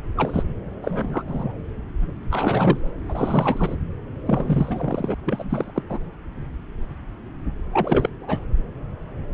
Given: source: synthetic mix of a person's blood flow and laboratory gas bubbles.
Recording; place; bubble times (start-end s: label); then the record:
Doppler ultrasound of blood flow; subclavian vein
0.17-0.44 s: bubbles
0.83-1.23 s: bubbles
1.28-1.52 s: bubbles
2.31-2.92 s: bubbles
3.08-3.75 s: bubbles
4.25-5.15 s: bubbles
5.24-5.72 s: bubbles
5.75-5.82 s: bubbles
5.89-5.99 s: bubbles
7.73-8.09 s: bubbles
8.20-8.45 s: bubbles
From the record:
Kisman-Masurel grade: 332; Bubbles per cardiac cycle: rolling drumbeat, 9 or more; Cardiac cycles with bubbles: 50 to 99%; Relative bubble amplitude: moderate (0.250 to 0.450); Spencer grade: 3 (all of the cardiac periods contain showers or single bubble signals, but not dominating or overriding the cardiac motion signals); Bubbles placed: anywhere in the cardiac cycle